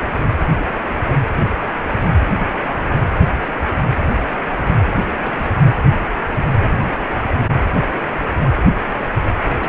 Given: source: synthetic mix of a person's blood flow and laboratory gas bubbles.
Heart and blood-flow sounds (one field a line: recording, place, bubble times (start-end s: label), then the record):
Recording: Doppler ultrasound of blood flow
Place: precordium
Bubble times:
5.19-5.58 s: bubbles
6.81-6.95 s: bubbles
7.23-7.40 s: bubbles
7.80-7.89 s: bubbles
8.05-8.10 s: bubbles
8.45-8.50 s: bubbles
9.58-9.69 s: bubbles
From the record:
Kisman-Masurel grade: 221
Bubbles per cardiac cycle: several, 3 to 8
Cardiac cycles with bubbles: 10 to 50%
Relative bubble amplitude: barely perceptible (0.100 to 0.250)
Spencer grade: 2 (many but less than half of the cardiac periods contain bubble signals, singularly or in groups)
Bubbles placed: anywhere in the cardiac cycle